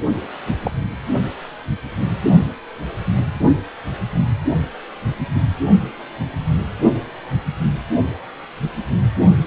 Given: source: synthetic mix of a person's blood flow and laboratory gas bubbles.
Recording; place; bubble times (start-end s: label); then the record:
Doppler ultrasound of blood flow; precordium
0.46-0.57 s: bubbles
0.62-0.72 s: bubbles
From the record:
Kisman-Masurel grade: 122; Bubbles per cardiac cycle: 1 to 2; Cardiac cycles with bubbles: 10 to 50%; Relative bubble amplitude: moderate (0.250 to 0.450); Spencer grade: 2 (many but less than half of the cardiac periods contain bubble signals, singularly or in groups); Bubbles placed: only in the low amplitude regions of the cardiac cycle